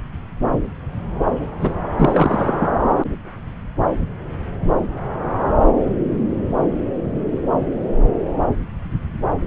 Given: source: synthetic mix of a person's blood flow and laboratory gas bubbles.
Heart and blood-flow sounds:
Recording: Doppler ultrasound of blood flow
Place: subclavian vein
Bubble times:
1.61-1.73 s: bubbles
1.98-2.68 s: bubbles
From the record:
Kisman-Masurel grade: 213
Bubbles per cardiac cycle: several, 3 to 8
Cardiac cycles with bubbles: 1 to 10%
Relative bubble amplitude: loud (0.450 to 0.775)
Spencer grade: 1 (occasional bubble signal discernible with the cardiac motion signal, with majority of cardiac periods free of bubbles)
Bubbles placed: anywhere in the cardiac cycle

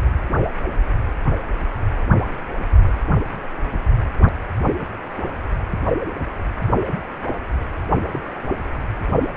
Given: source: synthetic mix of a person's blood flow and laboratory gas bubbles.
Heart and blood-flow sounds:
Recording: Doppler ultrasound of blood flow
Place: precordium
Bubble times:
8.12-8.20 s: bubbles
8.24-8.29 s: bubbles
From the record:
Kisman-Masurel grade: 111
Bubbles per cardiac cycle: 1 to 2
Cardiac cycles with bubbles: 1 to 10%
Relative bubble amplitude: barely perceptible (0.100 to 0.250)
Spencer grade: 1 (occasional bubble signal discernible with the cardiac motion signal, with majority of cardiac periods free of bubbles)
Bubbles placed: only in the low amplitude regions of the cardiac cycle

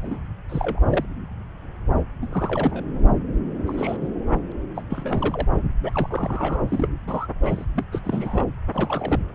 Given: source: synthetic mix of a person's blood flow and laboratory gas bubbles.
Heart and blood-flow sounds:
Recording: Doppler ultrasound of blood flow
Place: subclavian vein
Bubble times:
0.02-0.21 s: bubbles
0.49-0.80 s: bubbles
0.89-1.05 s: bubbles
2.21-2.83 s: bubbles
3.67-3.97 s: bubbles
4.00-4.08 s: bubbles
4.75-4.81 s: bubbles
4.89-5.47 s: bubbles
5.83-6.61 s: bubbles
6.68-6.88 s: bubbles
7.07-7.28 s: bubbles
7.42-7.65 s: bubbles
7.76-7.84 s: bubbles
7.91-8.01 s: bubbles
8.04-8.46 s: bubbles
8.73-9.20 s: bubbles
From the record:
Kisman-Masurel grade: 232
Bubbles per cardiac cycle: several, 3 to 8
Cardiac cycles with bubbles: 50 to 99%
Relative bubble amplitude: moderate (0.250 to 0.450)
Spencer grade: 3 (all of the cardiac periods contain showers or single bubble signals, but not dominating or overriding the cardiac motion signals)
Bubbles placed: anywhere in the cardiac cycle

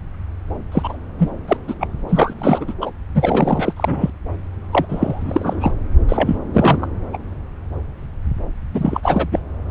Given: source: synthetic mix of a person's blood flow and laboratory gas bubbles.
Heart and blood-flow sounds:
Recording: Doppler ultrasound of blood flow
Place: subclavian vein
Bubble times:
0.72-0.97 s: bubbles
1.18-1.30 s: bubbles
1.47-1.56 s: bubbles
1.67-1.74 s: bubbles
1.80-1.88 s: bubbles
2.09-2.34 s: bubbles
2.38-2.65 s: bubbles
2.67-2.73 s: bubbles
2.81-2.90 s: bubbles
3.15-3.73 s: bubbles
3.76-4.10 s: bubbles
4.72-4.86 s: bubbles
4.88-5.71 s: bubbles
6.08-6.37 s: bubbles
6.53-6.87 s: bubbles
7.13-7.17 s: bubbles
8.74-9.27 s: bubbles
9.32-9.39 s: bubbles
From the record:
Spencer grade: 3 (all of the cardiac periods contain showers or single bubble signals, but not dominating or overriding the cardiac motion signals)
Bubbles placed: anywhere in the cardiac cycle

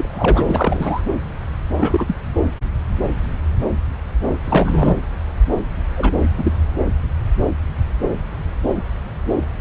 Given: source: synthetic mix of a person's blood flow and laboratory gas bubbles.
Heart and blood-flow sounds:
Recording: Doppler ultrasound of blood flow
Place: subclavian vein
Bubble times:
0.00-1.01 s: bubbles
1.78-2.15 s: bubbles
4.44-4.96 s: bubbles
5.94-6.30 s: bubbles
6.37-6.52 s: bubbles
From the record:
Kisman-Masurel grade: 223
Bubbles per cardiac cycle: several, 3 to 8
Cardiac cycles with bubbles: 10 to 50%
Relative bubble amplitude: loud (0.450 to 0.775)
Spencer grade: 2 (many but less than half of the cardiac periods contain bubble signals, singularly or in groups)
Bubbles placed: anywhere in the cardiac cycle

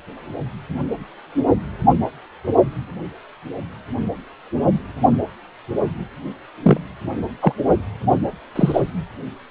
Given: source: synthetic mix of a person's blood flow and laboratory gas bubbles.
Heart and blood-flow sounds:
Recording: Doppler ultrasound of blood flow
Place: precordium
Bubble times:
6.62-6.78 s: bubbles
7.41-7.53 s: bubbles
8.55-8.81 s: bubbles
From the record:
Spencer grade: 2 (many but less than half of the cardiac periods contain bubble signals, singularly or in groups)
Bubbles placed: only in the low amplitude regions of the cardiac cycle

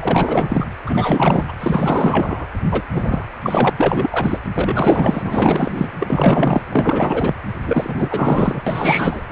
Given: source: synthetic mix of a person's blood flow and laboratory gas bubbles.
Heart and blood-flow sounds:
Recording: Doppler ultrasound of blood flow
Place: precordium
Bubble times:
0.00-0.66 s: bubbles
0.86-1.43 s: bubbles
1.48-1.52 s: bubbles
1.60-2.48 s: bubbles
2.71-2.82 s: bubbles
2.92-3.24 s: bubbles
3.43-3.70 s: bubbles
3.78-4.39 s: bubbles
4.54-5.22 s: bubbles
5.25-5.92 s: bubbles
6.00-6.62 s: bubbles
6.71-7.33 s: bubbles
7.65-8.62 s: bubbles
8.67-9.21 s: bubbles
9.29-9.31 s: bubbles
From the record:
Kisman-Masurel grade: 444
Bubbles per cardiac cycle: continuous sound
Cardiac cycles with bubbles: 100%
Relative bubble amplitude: maximal (0.775 to 0.999)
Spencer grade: 4 (maximum detectable bubble signal sounding continuously throughout systole and diastole of every cardiac period, and overriding the amplitude of the normal cardiac signals)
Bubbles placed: anywhere in the cardiac cycle

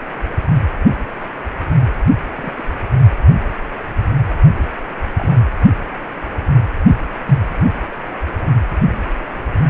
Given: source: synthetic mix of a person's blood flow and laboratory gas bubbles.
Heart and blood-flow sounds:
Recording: Doppler ultrasound of blood flow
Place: precordium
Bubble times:
2.34-2.53 s: bubbles
2.56-2.64 s: bubbles
5.17-5.38 s: bubbles
From the record:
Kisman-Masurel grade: 121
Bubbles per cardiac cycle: 1 to 2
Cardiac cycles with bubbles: 10 to 50%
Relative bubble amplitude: barely perceptible (0.100 to 0.250)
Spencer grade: 2 (many but less than half of the cardiac periods contain bubble signals, singularly or in groups)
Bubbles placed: anywhere in the cardiac cycle

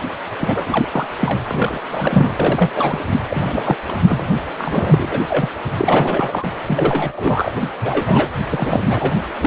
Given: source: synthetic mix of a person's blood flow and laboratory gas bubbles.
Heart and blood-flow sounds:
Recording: Doppler ultrasound of blood flow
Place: precordium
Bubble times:
0.39-0.88 s: bubbles
0.91-1.06 s: bubbles
1.19-1.42 s: bubbles
1.48-1.80 s: bubbles
1.91-2.34 s: bubbles
2.39-2.98 s: bubbles
3.29-3.77 s: bubbles
3.88-3.97 s: bubbles
4.07-4.28 s: bubbles
4.58-5.21 s: bubbles
5.28-5.50 s: bubbles
5.77-6.47 s: bubbles
6.66-7.52 s: bubbles
7.57-7.73 s: bubbles
7.81-8.29 s: bubbles
8.50-8.80 s: bubbles
8.89-9.12 s: bubbles
9.40-9.47 s: bubbles
From the record:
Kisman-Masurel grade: 332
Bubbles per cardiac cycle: rolling drumbeat, 9 or more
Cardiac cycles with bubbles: 50 to 99%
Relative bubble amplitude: moderate (0.250 to 0.450)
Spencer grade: 3 (all of the cardiac periods contain showers or single bubble signals, but not dominating or overriding the cardiac motion signals)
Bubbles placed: anywhere in the cardiac cycle

